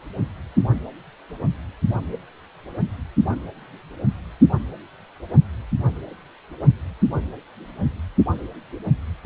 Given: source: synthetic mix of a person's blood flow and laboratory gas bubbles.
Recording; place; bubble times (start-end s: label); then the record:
Doppler ultrasound of blood flow; precordium
no bubbles
From the record:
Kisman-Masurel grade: 000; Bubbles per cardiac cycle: 0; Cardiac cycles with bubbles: 0%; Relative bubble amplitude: no bubbles discernible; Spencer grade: 0 (complete lack of bubble signals)